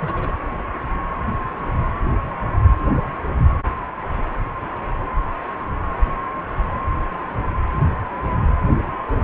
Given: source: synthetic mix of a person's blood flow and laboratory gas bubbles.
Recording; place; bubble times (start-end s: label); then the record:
Doppler ultrasound of blood flow; precordium
0.00-0.35 s: bubbles
From the record:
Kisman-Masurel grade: 211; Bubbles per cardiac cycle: several, 3 to 8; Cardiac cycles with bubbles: 1 to 10%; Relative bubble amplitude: barely perceptible (0.100 to 0.250); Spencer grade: 1 (occasional bubble signal discernible with the cardiac motion signal, with majority of cardiac periods free of bubbles); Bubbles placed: anywhere in the cardiac cycle